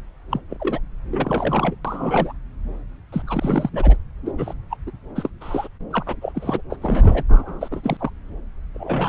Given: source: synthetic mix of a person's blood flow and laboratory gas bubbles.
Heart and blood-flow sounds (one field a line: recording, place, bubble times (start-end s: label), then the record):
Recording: Doppler ultrasound of blood flow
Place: subclavian vein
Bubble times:
0.30-0.41 s: bubbles
0.49-0.57 s: bubbles
0.59-0.79 s: bubbles
1.11-1.75 s: bubbles
1.84-2.32 s: bubbles
3.12-3.22 s: bubbles
3.26-3.69 s: bubbles
3.73-3.96 s: bubbles
4.25-4.32 s: bubbles
4.38-4.54 s: bubbles
4.70-4.77 s: bubbles
4.87-4.91 s: bubbles
5.16-5.29 s: bubbles
5.41-5.68 s: bubbles
5.91-6.16 s: bubbles
6.21-6.62 s: bubbles
6.70-6.77 s: bubbles
6.81-7.23 s: bubbles
7.29-7.68 s: bubbles
7.71-7.97 s: bubbles
8.00-8.11 s: bubbles
8.75-9.08 s: bubbles
From the record:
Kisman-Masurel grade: 242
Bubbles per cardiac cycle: several, 3 to 8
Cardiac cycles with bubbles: 100%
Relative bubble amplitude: moderate (0.250 to 0.450)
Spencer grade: 3 (all of the cardiac periods contain showers or single bubble signals, but not dominating or overriding the cardiac motion signals)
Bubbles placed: anywhere in the cardiac cycle